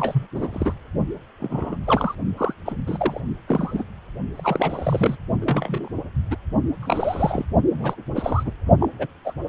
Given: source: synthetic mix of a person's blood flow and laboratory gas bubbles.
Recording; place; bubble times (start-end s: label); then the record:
Doppler ultrasound of blood flow; precordium
0.00-0.27 s: bubbles
0.34-0.48 s: bubbles
0.53-0.73 s: bubbles
1.40-1.77 s: bubbles
1.85-2.15 s: bubbles
2.38-2.54 s: bubbles
2.66-2.75 s: bubbles
2.87-3.21 s: bubbles
3.48-3.85 s: bubbles
4.35-5.16 s: bubbles
5.41-5.88 s: bubbles
6.30-6.36 s: bubbles
6.80-7.46 s: bubbles
7.70-7.96 s: bubbles
8.15-8.51 s: bubbles
8.80-8.89 s: bubbles
8.98-9.06 s: bubbles
9.24-9.33 s: bubbles
9.46-9.49 s: bubbles
From the record:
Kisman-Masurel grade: 242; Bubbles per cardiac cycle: several, 3 to 8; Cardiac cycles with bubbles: 100%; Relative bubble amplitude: moderate (0.250 to 0.450); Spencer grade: 3 (all of the cardiac periods contain showers or single bubble signals, but not dominating or overriding the cardiac motion signals); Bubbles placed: only in the low amplitude regions of the cardiac cycle